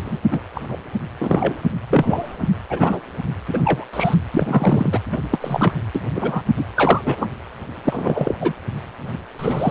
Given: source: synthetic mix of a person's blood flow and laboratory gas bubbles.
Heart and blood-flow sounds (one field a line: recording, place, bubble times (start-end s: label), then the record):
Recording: Doppler ultrasound of blood flow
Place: precordium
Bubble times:
0.05-0.18 s: bubbles
0.31-0.40 s: bubbles
0.54-0.76 s: bubbles
1.19-1.61 s: bubbles
1.90-2.36 s: bubbles
2.40-2.49 s: bubbles
2.69-3.00 s: bubbles
3.47-3.85 s: bubbles
3.93-4.15 s: bubbles
4.34-5.00 s: bubbles
5.12-5.18 s: bubbles
5.31-5.39 s: bubbles
5.41-5.74 s: bubbles
5.95-6.00 s: bubbles
6.15-6.44 s: bubbles
6.57-6.65 s: bubbles
6.76-7.01 s: bubbles
7.04-7.29 s: bubbles
7.85-8.36 s: bubbles
8.40-8.53 s: bubbles
9.39-9.71 s: bubbles
From the record:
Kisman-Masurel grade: 233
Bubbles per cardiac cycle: several, 3 to 8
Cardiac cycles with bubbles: 50 to 99%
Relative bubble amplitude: loud (0.450 to 0.775)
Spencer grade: 3 (all of the cardiac periods contain showers or single bubble signals, but not dominating or overriding the cardiac motion signals)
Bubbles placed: anywhere in the cardiac cycle